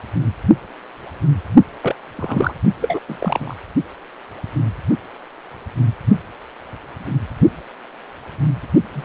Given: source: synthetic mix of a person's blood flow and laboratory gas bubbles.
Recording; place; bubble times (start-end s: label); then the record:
Doppler ultrasound of blood flow; precordium
1.82-1.96 s: bubbles
2.17-2.53 s: bubbles
2.81-3.00 s: bubbles
3.08-3.54 s: bubbles
8.94-9.05 s: bubbles
From the record:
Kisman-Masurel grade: 222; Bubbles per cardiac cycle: several, 3 to 8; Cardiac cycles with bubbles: 10 to 50%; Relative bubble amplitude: moderate (0.250 to 0.450); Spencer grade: 2 (many but less than half of the cardiac periods contain bubble signals, singularly or in groups); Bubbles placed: only in the low amplitude regions of the cardiac cycle